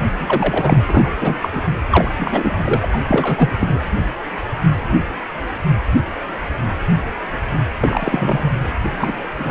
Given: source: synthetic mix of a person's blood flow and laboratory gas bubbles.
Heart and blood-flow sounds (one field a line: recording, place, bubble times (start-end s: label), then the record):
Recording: Doppler ultrasound of blood flow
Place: precordium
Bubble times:
0.18-0.83 s: bubbles
0.88-1.11 s: bubbles
1.19-1.37 s: bubbles
1.42-1.49 s: bubbles
1.52-1.62 s: bubbles
1.91-2.11 s: bubbles
2.17-2.87 s: bubbles
2.94-3.00 s: bubbles
3.07-3.54 s: bubbles
3.58-3.80 s: bubbles
7.80-8.51 s: bubbles
8.97-9.13 s: bubbles
9.38-9.51 s: bubbles
From the record:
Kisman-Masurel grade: 233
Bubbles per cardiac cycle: several, 3 to 8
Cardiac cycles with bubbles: 50 to 99%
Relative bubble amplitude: loud (0.450 to 0.775)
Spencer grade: 3 (all of the cardiac periods contain showers or single bubble signals, but not dominating or overriding the cardiac motion signals)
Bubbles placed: anywhere in the cardiac cycle